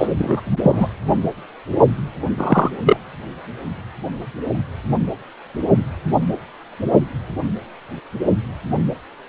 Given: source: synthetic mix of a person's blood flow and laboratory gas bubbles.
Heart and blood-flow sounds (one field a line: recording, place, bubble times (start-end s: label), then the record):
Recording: Doppler ultrasound of blood flow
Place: precordium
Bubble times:
0.00-0.11 s: bubbles
0.18-0.41 s: bubbles
0.62-0.88 s: bubbles
2.38-2.71 s: bubbles
2.83-2.97 s: bubbles
From the record:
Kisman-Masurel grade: 223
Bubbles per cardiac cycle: several, 3 to 8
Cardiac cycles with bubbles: 10 to 50%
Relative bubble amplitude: loud (0.450 to 0.775)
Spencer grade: 2 (many but less than half of the cardiac periods contain bubble signals, singularly or in groups)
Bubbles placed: anywhere in the cardiac cycle